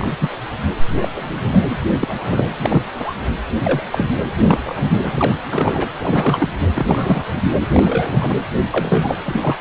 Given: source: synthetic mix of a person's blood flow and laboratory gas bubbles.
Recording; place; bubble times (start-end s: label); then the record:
Doppler ultrasound of blood flow; precordium
0.00-0.11 s: bubbles
0.20-0.29 s: bubbles
1.02-1.08 s: bubbles
1.15-1.62 s: bubbles
2.01-2.48 s: bubbles
2.61-2.82 s: bubbles
2.95-3.15 s: bubbles
3.62-3.82 s: bubbles
3.91-4.05 s: bubbles
4.40-5.11 s: bubbles
5.15-5.35 s: bubbles
5.50-5.89 s: bubbles
6.00-6.48 s: bubbles
6.75-7.24 s: bubbles
7.73-8.40 s: bubbles
8.71-9.17 s: bubbles
9.25-9.56 s: bubbles
From the record:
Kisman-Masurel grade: 242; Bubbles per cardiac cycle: several, 3 to 8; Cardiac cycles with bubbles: 100%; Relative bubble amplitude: moderate (0.250 to 0.450); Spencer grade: 3 (all of the cardiac periods contain showers or single bubble signals, but not dominating or overriding the cardiac motion signals); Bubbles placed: anywhere in the cardiac cycle